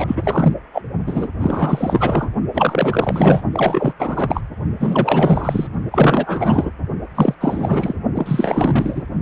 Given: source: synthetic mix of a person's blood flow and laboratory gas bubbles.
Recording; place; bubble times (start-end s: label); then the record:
Doppler ultrasound of blood flow; precordium
0.00-0.54 s: bubbles
0.73-0.82 s: bubbles
1.06-1.28 s: bubbles
1.39-2.28 s: bubbles
2.53-3.42 s: bubbles
3.52-3.93 s: bubbles
3.98-4.41 s: bubbles
4.79-5.67 s: bubbles
5.91-6.71 s: bubbles
7.15-7.35 s: bubbles
7.41-7.93 s: bubbles
8.15-9.02 s: bubbles
From the record:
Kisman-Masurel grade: 444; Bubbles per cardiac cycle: continuous sound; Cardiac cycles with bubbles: 100%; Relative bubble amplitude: maximal (0.775 to 0.999); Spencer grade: 4 (maximum detectable bubble signal sounding continuously throughout systole and diastole of every cardiac period, and overriding the amplitude of the normal cardiac signals); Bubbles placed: only in the low amplitude regions of the cardiac cycle